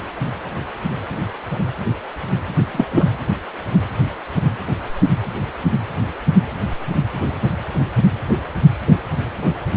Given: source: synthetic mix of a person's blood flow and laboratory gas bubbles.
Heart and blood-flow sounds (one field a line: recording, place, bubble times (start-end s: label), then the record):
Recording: Doppler ultrasound of blood flow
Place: precordium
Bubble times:
2.73-2.84 s: bubbles
2.92-3.06 s: bubbles
From the record:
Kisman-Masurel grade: 113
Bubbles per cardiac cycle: 1 to 2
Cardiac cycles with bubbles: 1 to 10%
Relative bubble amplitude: loud (0.450 to 0.775)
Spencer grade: 1 (occasional bubble signal discernible with the cardiac motion signal, with majority of cardiac periods free of bubbles)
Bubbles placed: anywhere in the cardiac cycle